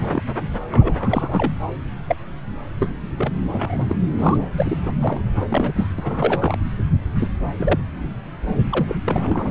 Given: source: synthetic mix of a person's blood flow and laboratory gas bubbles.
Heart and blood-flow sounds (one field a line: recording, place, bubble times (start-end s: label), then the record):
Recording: Doppler ultrasound of blood flow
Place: subclavian vein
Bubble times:
0.00-0.23 s: bubbles
0.69-1.52 s: bubbles
2.07-2.16 s: bubbles
2.79-2.90 s: bubbles
3.17-3.31 s: bubbles
3.52-3.86 s: bubbles
3.88-3.96 s: bubbles
4.18-4.38 s: bubbles
4.56-4.78 s: bubbles
4.82-4.92 s: bubbles
5.00-5.22 s: bubbles
5.35-5.46 s: bubbles
5.49-5.72 s: bubbles
5.75-5.87 s: bubbles
5.98-6.57 s: bubbles
7.20-7.30 s: bubbles
7.59-7.80 s: bubbles
8.70-8.96 s: bubbles
9.05-9.49 s: bubbles
From the record:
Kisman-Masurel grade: 232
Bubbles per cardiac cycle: several, 3 to 8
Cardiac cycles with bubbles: 50 to 99%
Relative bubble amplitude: moderate (0.250 to 0.450)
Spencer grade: 3 (all of the cardiac periods contain showers or single bubble signals, but not dominating or overriding the cardiac motion signals)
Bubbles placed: anywhere in the cardiac cycle